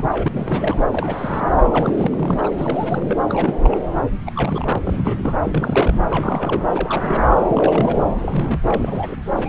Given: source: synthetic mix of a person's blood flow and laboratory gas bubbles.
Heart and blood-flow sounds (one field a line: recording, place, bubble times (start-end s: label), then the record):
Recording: Doppler ultrasound of blood flow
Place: subclavian vein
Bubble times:
0.00-0.28 s: bubbles
0.33-0.85 s: bubbles
0.91-1.45 s: bubbles
1.71-2.53 s: bubbles
2.57-3.24 s: bubbles
3.28-3.81 s: bubbles
4.26-4.31 s: bubbles
4.36-4.78 s: bubbles
4.85-5.36 s: bubbles
5.43-5.95 s: bubbles
6.10-6.63 s: bubbles
6.75-7.25 s: bubbles
7.49-8.04 s: bubbles
8.22-8.60 s: bubbles
8.67-9.17 s: bubbles
9.36-9.49 s: bubbles
From the record:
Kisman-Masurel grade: 342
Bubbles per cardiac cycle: rolling drumbeat, 9 or more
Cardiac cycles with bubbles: 100%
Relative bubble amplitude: moderate (0.250 to 0.450)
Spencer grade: 3 (all of the cardiac periods contain showers or single bubble signals, but not dominating or overriding the cardiac motion signals)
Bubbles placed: anywhere in the cardiac cycle